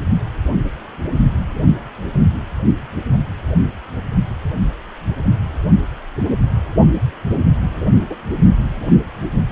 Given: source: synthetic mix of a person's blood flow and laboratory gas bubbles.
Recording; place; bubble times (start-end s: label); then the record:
Doppler ultrasound of blood flow; precordium
8.10-8.16 s: bubbles
From the record:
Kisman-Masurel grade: 122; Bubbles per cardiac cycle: 1 to 2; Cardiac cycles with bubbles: 10 to 50%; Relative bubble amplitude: moderate (0.250 to 0.450); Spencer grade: 2 (many but less than half of the cardiac periods contain bubble signals, singularly or in groups); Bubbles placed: only in the low amplitude regions of the cardiac cycle